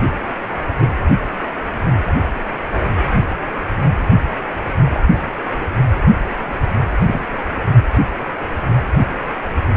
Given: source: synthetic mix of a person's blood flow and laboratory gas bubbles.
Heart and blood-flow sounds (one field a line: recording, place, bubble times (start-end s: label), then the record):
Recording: Doppler ultrasound of blood flow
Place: precordium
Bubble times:
0.80-0.89 s: bubbles
4.94-5.03 s: bubbles
5.58-5.67 s: bubbles
7.00-7.25 s: bubbles
From the record:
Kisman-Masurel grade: 122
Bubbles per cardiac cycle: 1 to 2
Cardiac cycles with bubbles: 10 to 50%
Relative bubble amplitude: moderate (0.250 to 0.450)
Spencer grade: 2 (many but less than half of the cardiac periods contain bubble signals, singularly or in groups)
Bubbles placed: anywhere in the cardiac cycle